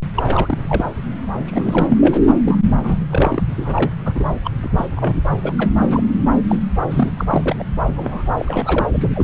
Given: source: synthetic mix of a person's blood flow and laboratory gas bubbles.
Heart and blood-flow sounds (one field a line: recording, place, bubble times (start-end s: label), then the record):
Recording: Doppler ultrasound of blood flow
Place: subclavian vein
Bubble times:
0.14-0.99 s: bubbles
1.33-2.20 s: bubbles
2.44-2.57 s: bubbles
2.83-2.97 s: bubbles
3.08-3.45 s: bubbles
3.56-3.92 s: bubbles
4.05-4.12 s: bubbles
4.15-4.27 s: bubbles
4.44-4.50 s: bubbles
4.63-4.69 s: bubbles
4.77-4.88 s: bubbles
4.96-5.13 s: bubbles
5.32-5.36 s: bubbles
5.42-5.53 s: bubbles
5.58-5.71 s: bubbles
5.81-6.04 s: bubbles
6.48-6.58 s: bubbles
6.90-7.10 s: bubbles
7.17-7.56 s: bubbles
7.59-7.64 s: bubbles
7.96-8.33 s: bubbles
8.38-8.89 s: bubbles
8.93-9.09 s: bubbles
9.15-9.24 s: bubbles
From the record:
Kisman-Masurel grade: 332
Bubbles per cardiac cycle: rolling drumbeat, 9 or more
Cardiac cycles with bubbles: 50 to 99%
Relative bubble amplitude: moderate (0.250 to 0.450)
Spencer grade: 3 (all of the cardiac periods contain showers or single bubble signals, but not dominating or overriding the cardiac motion signals)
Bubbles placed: anywhere in the cardiac cycle